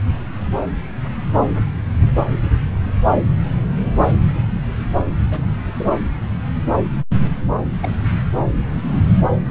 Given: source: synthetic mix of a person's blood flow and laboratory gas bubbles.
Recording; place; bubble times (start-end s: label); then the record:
Doppler ultrasound of blood flow; subclavian vein
2.00-2.10 s: bubbles
5.31-5.51 s: bubbles
5.74-5.89 s: bubbles
7.82-7.94 s: bubbles
8.37-8.44 s: bubbles
From the record:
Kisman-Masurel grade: 121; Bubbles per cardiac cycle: 1 to 2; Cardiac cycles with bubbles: 10 to 50%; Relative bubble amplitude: barely perceptible (0.100 to 0.250); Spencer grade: 2 (many but less than half of the cardiac periods contain bubble signals, singularly or in groups); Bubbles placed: anywhere in the cardiac cycle